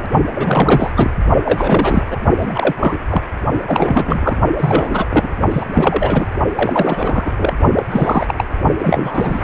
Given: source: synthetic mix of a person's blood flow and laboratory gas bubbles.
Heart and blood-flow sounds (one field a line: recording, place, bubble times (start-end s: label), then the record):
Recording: Doppler ultrasound of blood flow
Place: precordium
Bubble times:
0.35-0.92 s: bubbles
0.97-1.11 s: bubbles
1.46-2.03 s: bubbles
2.10-2.19 s: bubbles
2.37-2.73 s: bubbles
2.78-2.98 s: bubbles
3.09-3.21 s: bubbles
3.67-4.38 s: bubbles
4.58-5.07 s: bubbles
5.10-5.36 s: bubbles
5.51-5.66 s: bubbles
5.74-6.27 s: bubbles
6.55-7.32 s: bubbles
7.36-7.54 s: bubbles
7.75-7.83 s: bubbles
7.90-8.34 s: bubbles
8.37-8.45 s: bubbles
8.79-9.44 s: bubbles
From the record:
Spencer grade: 3 (all of the cardiac periods contain showers or single bubble signals, but not dominating or overriding the cardiac motion signals)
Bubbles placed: only in the low amplitude regions of the cardiac cycle